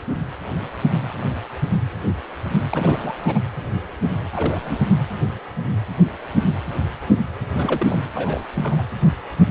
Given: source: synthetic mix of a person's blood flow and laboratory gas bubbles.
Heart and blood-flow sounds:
Doppler ultrasound of blood flow; precordium
2.70-3.12 s: bubbles
3.24-3.40 s: bubbles
4.33-5.00 s: bubbles
7.52-8.04 s: bubbles
8.15-8.45 s: bubbles
8.54-8.83 s: bubbles
From the record:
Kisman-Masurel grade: 222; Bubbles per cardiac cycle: several, 3 to 8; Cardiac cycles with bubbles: 10 to 50%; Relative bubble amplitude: moderate (0.250 to 0.450); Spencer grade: 2 (many but less than half of the cardiac periods contain bubble signals, singularly or in groups); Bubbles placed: anywhere in the cardiac cycle

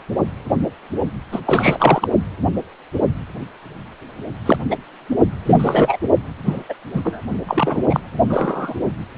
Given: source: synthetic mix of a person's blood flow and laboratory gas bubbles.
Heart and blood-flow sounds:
Doppler ultrasound of blood flow; precordium
1.32-1.40 s: bubbles
1.45-2.12 s: bubbles
4.46-4.58 s: bubbles
4.71-4.77 s: bubbles
5.46-5.97 s: bubbles
6.46-6.63 s: bubbles
6.69-6.74 s: bubbles
6.93-7.21 s: bubbles
7.47-7.81 s: bubbles
7.90-8.00 s: bubbles
8.29-8.75 s: bubbles
From the record:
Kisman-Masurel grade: 233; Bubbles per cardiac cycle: several, 3 to 8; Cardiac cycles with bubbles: 50 to 99%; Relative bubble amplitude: loud (0.450 to 0.775); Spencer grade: 3 (all of the cardiac periods contain showers or single bubble signals, but not dominating or overriding the cardiac motion signals); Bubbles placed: only in the low amplitude regions of the cardiac cycle

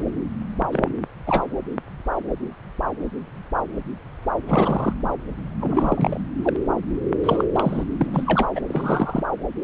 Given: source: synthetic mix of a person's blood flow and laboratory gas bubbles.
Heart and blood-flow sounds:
Doppler ultrasound of blood flow; subclavian vein
0.71-0.92 s: bubbles
1.27-1.46 s: bubbles
4.47-4.92 s: bubbles
5.60-6.21 s: bubbles
6.43-6.57 s: bubbles
7.23-7.45 s: bubbles
7.52-7.84 s: bubbles
7.99-8.46 s: bubbles
8.55-8.60 s: bubbles
8.68-9.23 s: bubbles
From the record:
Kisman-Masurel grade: 222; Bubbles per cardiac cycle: several, 3 to 8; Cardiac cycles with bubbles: 10 to 50%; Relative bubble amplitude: moderate (0.250 to 0.450); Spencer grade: 2 (many but less than half of the cardiac periods contain bubble signals, singularly or in groups); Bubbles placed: anywhere in the cardiac cycle

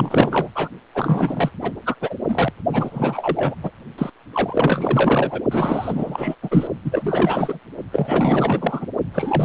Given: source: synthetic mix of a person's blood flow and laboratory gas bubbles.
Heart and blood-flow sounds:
Doppler ultrasound of blood flow; precordium
0.00-0.48 s: bubbles
0.54-0.69 s: bubbles
0.94-1.51 s: bubbles
1.61-1.71 s: bubbles
1.86-1.95 s: bubbles
2.00-2.15 s: bubbles
2.28-2.53 s: bubbles
2.72-3.55 s: bubbles
3.62-3.71 s: bubbles
3.98-4.10 s: bubbles
4.33-5.41 s: bubbles
5.51-6.35 s: bubbles
6.42-6.67 s: bubbles
6.84-7.59 s: bubbles
7.92-8.87 s: bubbles
9.13-9.45 s: bubbles
From the record:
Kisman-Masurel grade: 444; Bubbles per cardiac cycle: continuous sound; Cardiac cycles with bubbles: 100%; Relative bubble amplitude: maximal (0.775 to 0.999); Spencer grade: 4 (maximum detectable bubble signal sounding continuously throughout systole and diastole of every cardiac period, and overriding the amplitude of the normal cardiac signals); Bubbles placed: only in the low amplitude regions of the cardiac cycle

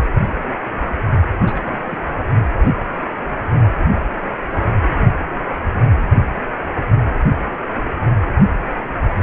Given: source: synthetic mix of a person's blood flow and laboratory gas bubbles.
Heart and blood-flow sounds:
Doppler ultrasound of blood flow; precordium
1.45-1.98 s: bubbles
From the record:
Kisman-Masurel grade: 221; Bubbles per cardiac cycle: several, 3 to 8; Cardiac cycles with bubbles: 10 to 50%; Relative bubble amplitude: barely perceptible (0.100 to 0.250); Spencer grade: 2 (many but less than half of the cardiac periods contain bubble signals, singularly or in groups); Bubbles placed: anywhere in the cardiac cycle

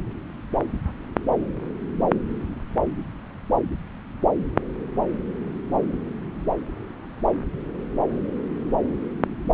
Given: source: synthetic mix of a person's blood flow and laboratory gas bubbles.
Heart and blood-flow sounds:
Doppler ultrasound of blood flow; subclavian vein
no bubbles
From the record:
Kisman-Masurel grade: 000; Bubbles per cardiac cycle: 0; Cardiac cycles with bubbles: 0%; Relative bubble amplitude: no bubbles discernible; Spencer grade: 0 (complete lack of bubble signals)

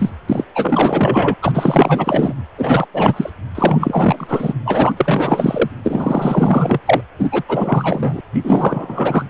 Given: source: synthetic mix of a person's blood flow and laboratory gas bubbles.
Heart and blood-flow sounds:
Doppler ultrasound of blood flow; precordium
0.00-0.10 s: bubbles
0.28-0.44 s: bubbles
0.54-1.34 s: bubbles
1.42-2.34 s: bubbles
2.57-2.87 s: bubbles
2.94-3.30 s: bubbles
3.54-4.53 s: bubbles
4.65-4.92 s: bubbles
4.97-5.70 s: bubbles
5.83-6.79 s: bubbles
6.86-7.02 s: bubbles
7.19-7.29 s: bubbles
7.32-7.43 s: bubbles
7.48-8.21 s: bubbles
8.34-8.41 s: bubbles
8.44-9.23 s: bubbles
From the record:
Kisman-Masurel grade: 444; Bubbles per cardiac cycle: continuous sound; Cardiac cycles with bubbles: 100%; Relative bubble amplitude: maximal (0.775 to 0.999); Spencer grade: 4 (maximum detectable bubble signal sounding continuously throughout systole and diastole of every cardiac period, and overriding the amplitude of the normal cardiac signals); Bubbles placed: anywhere in the cardiac cycle

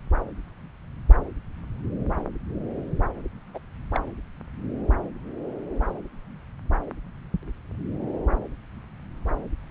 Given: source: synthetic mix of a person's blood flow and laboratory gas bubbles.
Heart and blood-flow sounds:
Doppler ultrasound of blood flow; subclavian vein
3.54-3.58 s: bubbles
3.94-4.06 s: bubbles
From the record:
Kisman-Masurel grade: 121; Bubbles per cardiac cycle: 1 to 2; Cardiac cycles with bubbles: 10 to 50%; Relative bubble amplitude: barely perceptible (0.100 to 0.250); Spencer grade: 2 (many but less than half of the cardiac periods contain bubble signals, singularly or in groups); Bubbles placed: anywhere in the cardiac cycle

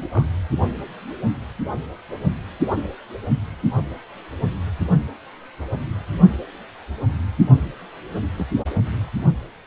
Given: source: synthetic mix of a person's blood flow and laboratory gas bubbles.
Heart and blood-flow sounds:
Doppler ultrasound of blood flow; precordium
0.00-0.08 s: bubbles
0.11-0.29 s: bubbles
8.38-8.46 s: bubbles
From the record:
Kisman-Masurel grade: 121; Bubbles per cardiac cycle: 1 to 2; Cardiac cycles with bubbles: 10 to 50%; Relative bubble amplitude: barely perceptible (0.100 to 0.250); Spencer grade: 2 (many but less than half of the cardiac periods contain bubble signals, singularly or in groups); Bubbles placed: only in the low amplitude regions of the cardiac cycle

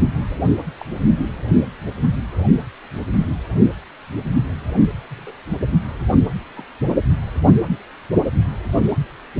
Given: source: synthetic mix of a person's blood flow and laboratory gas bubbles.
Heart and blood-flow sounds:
Doppler ultrasound of blood flow; precordium
0.77-0.85 s: bubbles
5.10-5.33 s: bubbles
6.54-6.64 s: bubbles
From the record:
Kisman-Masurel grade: 121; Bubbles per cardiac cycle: 1 to 2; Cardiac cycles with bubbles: 10 to 50%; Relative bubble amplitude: barely perceptible (0.100 to 0.250); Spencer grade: 2 (many but less than half of the cardiac periods contain bubble signals, singularly or in groups); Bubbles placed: anywhere in the cardiac cycle

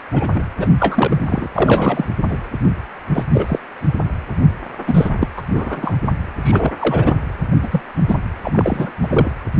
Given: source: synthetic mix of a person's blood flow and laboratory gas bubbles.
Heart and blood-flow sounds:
Doppler ultrasound of blood flow; precordium
0.13-0.29 s: bubbles
0.34-0.44 s: bubbles
0.57-0.69 s: bubbles
0.79-1.49 s: bubbles
1.54-2.09 s: bubbles
2.29-2.40 s: bubbles
3.14-3.23 s: bubbles
3.33-3.59 s: bubbles
4.87-5.10 s: bubbles
5.20-5.28 s: bubbles
5.37-5.42 s: bubbles
5.54-5.99 s: bubbles
6.43-6.72 s: bubbles
6.79-7.13 s: bubbles
7.62-7.81 s: bubbles
8.08-8.15 s: bubbles
8.44-8.91 s: bubbles
9.02-9.31 s: bubbles
From the record:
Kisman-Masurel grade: 233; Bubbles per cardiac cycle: several, 3 to 8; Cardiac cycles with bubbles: 50 to 99%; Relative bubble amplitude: loud (0.450 to 0.775); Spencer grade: 3 (all of the cardiac periods contain showers or single bubble signals, but not dominating or overriding the cardiac motion signals); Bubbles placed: anywhere in the cardiac cycle

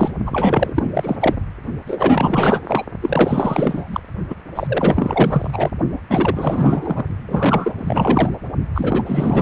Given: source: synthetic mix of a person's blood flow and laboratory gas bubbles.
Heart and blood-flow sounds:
Doppler ultrasound of blood flow; precordium
0.00-0.12 s: bubbles
0.27-0.90 s: bubbles
0.94-1.16 s: bubbles
1.20-1.35 s: bubbles
1.86-2.85 s: bubbles
3.01-4.00 s: bubbles
4.30-4.35 s: bubbles
4.55-5.71 s: bubbles
5.92-6.00 s: bubbles
6.09-7.04 s: bubbles
7.28-7.75 s: bubbles
7.78-8.29 s: bubbles
8.74-9.42 s: bubbles
From the record:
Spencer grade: 4 (maximum detectable bubble signal sounding continuously throughout systole and diastole of every cardiac period, and overriding the amplitude of the normal cardiac signals); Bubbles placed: only in the low amplitude regions of the cardiac cycle

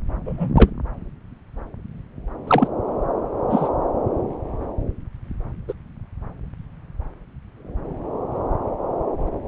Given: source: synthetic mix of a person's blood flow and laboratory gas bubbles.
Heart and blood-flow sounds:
Doppler ultrasound of blood flow; subclavian vein
0.25-0.50 s: bubbles
0.55-0.71 s: bubbles
2.47-2.68 s: bubbles
3.50-3.70 s: bubbles
5.67-5.73 s: bubbles
From the record:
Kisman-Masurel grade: 123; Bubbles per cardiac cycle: 1 to 2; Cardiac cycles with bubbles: 10 to 50%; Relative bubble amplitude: loud (0.450 to 0.775); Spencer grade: 2 (many but less than half of the cardiac periods contain bubble signals, singularly or in groups); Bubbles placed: anywhere in the cardiac cycle

